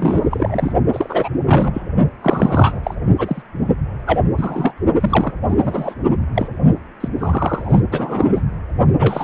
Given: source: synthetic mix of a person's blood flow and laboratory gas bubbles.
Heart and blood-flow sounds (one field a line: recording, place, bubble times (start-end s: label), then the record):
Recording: Doppler ultrasound of blood flow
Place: precordium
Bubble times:
0.00-0.26 s: bubbles
0.30-0.73 s: bubbles
0.93-1.29 s: bubbles
1.45-1.83 s: bubbles
2.22-2.79 s: bubbles
2.83-2.94 s: bubbles
3.18-3.42 s: bubbles
4.06-4.20 s: bubbles
4.37-4.73 s: bubbles
5.00-5.32 s: bubbles
5.49-5.94 s: bubbles
6.35-6.47 s: bubbles
7.00-7.08 s: bubbles
7.18-7.80 s: bubbles
7.91-8.42 s: bubbles
8.98-9.24 s: bubbles
From the record:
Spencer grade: 3 (all of the cardiac periods contain showers or single bubble signals, but not dominating or overriding the cardiac motion signals)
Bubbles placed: only in the low amplitude regions of the cardiac cycle